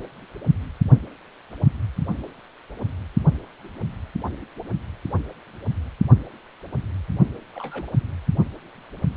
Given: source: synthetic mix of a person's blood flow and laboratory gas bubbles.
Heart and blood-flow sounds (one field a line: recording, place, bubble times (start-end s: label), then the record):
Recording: Doppler ultrasound of blood flow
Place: precordium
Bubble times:
7.55-7.91 s: bubbles
From the record:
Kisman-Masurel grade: 121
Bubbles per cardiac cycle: 1 to 2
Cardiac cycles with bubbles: 10 to 50%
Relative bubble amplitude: barely perceptible (0.100 to 0.250)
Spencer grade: 2 (many but less than half of the cardiac periods contain bubble signals, singularly or in groups)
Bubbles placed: only in the low amplitude regions of the cardiac cycle